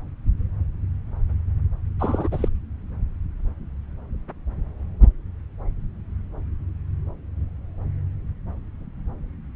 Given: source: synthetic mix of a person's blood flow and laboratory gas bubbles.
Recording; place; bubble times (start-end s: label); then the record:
Doppler ultrasound of blood flow; subclavian vein
1.99-2.28 s: bubbles
2.31-2.48 s: bubbles
From the record:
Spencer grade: 1 (occasional bubble signal discernible with the cardiac motion signal, with majority of cardiac periods free of bubbles); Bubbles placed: anywhere in the cardiac cycle